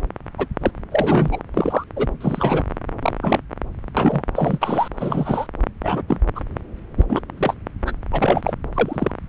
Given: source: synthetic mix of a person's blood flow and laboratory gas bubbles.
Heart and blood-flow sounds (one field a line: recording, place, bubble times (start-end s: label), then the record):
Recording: Doppler ultrasound of blood flow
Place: subclavian vein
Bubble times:
0.38-0.46 s: bubbles
0.61-0.71 s: bubbles
0.91-1.41 s: bubbles
1.54-1.84 s: bubbles
1.96-2.08 s: bubbles
2.21-2.64 s: bubbles
3.02-3.12 s: bubbles
3.23-3.41 s: bubbles
3.96-4.23 s: bubbles
4.34-4.58 s: bubbles
4.61-4.88 s: bubbles
4.97-5.47 s: bubbles
5.83-6.02 s: bubbles
6.08-6.18 s: bubbles
6.35-6.41 s: bubbles
6.97-7.06 s: bubbles
7.08-7.21 s: bubbles
7.38-7.54 s: bubbles
7.85-7.92 s: bubbles
8.12-8.53 s: bubbles
8.73-9.12 s: bubbles
From the record:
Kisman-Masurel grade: 242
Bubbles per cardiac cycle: several, 3 to 8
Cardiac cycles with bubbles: 100%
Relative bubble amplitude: moderate (0.250 to 0.450)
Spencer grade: 3 (all of the cardiac periods contain showers or single bubble signals, but not dominating or overriding the cardiac motion signals)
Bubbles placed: anywhere in the cardiac cycle